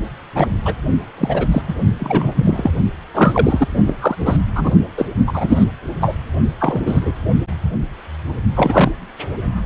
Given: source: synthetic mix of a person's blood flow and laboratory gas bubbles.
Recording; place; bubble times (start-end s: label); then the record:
Doppler ultrasound of blood flow; precordium
0.35-0.49 s: bubbles
0.65-0.75 s: bubbles
1.18-1.47 s: bubbles
1.51-1.61 s: bubbles
1.68-1.75 s: bubbles
1.99-2.71 s: bubbles
3.14-3.68 s: bubbles
3.85-3.96 s: bubbles
4.00-4.16 s: bubbles
4.20-4.37 s: bubbles
4.55-4.76 s: bubbles
4.97-5.05 s: bubbles
5.27-5.65 s: bubbles
6.00-6.16 s: bubbles
6.59-6.81 s: bubbles
6.85-7.12 s: bubbles
8.56-8.92 s: bubbles
From the record:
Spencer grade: 3 (all of the cardiac periods contain showers or single bubble signals, but not dominating or overriding the cardiac motion signals); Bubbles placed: only in the low amplitude regions of the cardiac cycle